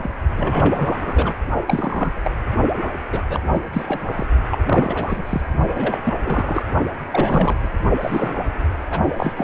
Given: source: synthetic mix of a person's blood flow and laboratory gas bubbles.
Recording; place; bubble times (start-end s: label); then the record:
Doppler ultrasound of blood flow; precordium
0.00-0.10 s: bubbles
0.34-1.34 s: bubbles
1.67-2.12 s: bubbles
2.23-2.31 s: bubbles
2.76-2.89 s: bubbles
3.12-3.23 s: bubbles
3.29-3.40 s: bubbles
3.54-3.62 s: bubbles
3.73-4.01 s: bubbles
4.08-4.25 s: bubbles
4.50-4.58 s: bubbles
4.66-5.21 s: bubbles
5.25-5.42 s: bubbles
5.73-6.01 s: bubbles
6.04-6.13 s: bubbles
6.23-6.62 s: bubbles
7.10-7.68 s: bubbles
8.01-8.48 s: bubbles
8.90-9.00 s: bubbles
9.16-9.33 s: bubbles
9.36-9.44 s: bubbles
From the record:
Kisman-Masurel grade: 342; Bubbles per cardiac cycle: rolling drumbeat, 9 or more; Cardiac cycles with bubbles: 100%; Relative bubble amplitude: moderate (0.250 to 0.450); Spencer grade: 3 (all of the cardiac periods contain showers or single bubble signals, but not dominating or overriding the cardiac motion signals); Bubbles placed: only in the low amplitude regions of the cardiac cycle